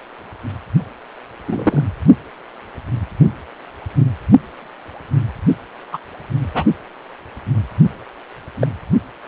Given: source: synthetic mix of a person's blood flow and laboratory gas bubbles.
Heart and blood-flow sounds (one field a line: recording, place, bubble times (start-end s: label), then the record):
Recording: Doppler ultrasound of blood flow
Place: precordium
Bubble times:
1.45-1.83 s: bubbles
5.92-5.98 s: bubbles
6.54-6.64 s: bubbles
8.59-8.67 s: bubbles
From the record:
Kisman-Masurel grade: 123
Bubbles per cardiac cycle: 1 to 2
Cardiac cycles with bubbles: 10 to 50%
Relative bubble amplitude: loud (0.450 to 0.775)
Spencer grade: 2 (many but less than half of the cardiac periods contain bubble signals, singularly or in groups)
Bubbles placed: only in the low amplitude regions of the cardiac cycle